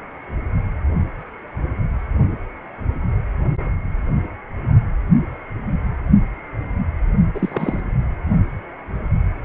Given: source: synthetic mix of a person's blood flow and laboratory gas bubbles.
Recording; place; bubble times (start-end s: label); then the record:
Doppler ultrasound of blood flow; precordium
7.34-7.80 s: bubbles
From the record:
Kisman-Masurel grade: 212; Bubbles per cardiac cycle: several, 3 to 8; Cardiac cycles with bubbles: 1 to 10%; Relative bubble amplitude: moderate (0.250 to 0.450); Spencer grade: 1 (occasional bubble signal discernible with the cardiac motion signal, with majority of cardiac periods free of bubbles); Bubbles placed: only in the low amplitude regions of the cardiac cycle